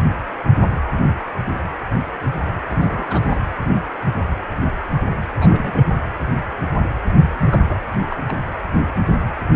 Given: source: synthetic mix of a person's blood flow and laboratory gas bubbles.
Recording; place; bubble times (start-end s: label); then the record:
Doppler ultrasound of blood flow; precordium
2.70-3.41 s: bubbles
5.37-5.84 s: bubbles
7.38-7.65 s: bubbles
7.69-7.79 s: bubbles
8.09-8.17 s: bubbles
8.28-8.37 s: bubbles
From the record:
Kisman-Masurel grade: 221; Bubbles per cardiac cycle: several, 3 to 8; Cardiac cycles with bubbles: 10 to 50%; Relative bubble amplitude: barely perceptible (0.100 to 0.250); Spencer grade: 2 (many but less than half of the cardiac periods contain bubble signals, singularly or in groups); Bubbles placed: anywhere in the cardiac cycle